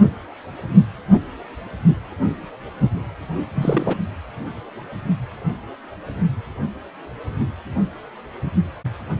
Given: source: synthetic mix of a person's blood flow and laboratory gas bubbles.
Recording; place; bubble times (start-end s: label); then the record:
Doppler ultrasound of blood flow; precordium
3.55-3.98 s: bubbles
From the record:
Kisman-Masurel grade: 212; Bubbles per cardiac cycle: several, 3 to 8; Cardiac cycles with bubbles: 1 to 10%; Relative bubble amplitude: moderate (0.250 to 0.450); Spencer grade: 1 (occasional bubble signal discernible with the cardiac motion signal, with majority of cardiac periods free of bubbles); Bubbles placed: anywhere in the cardiac cycle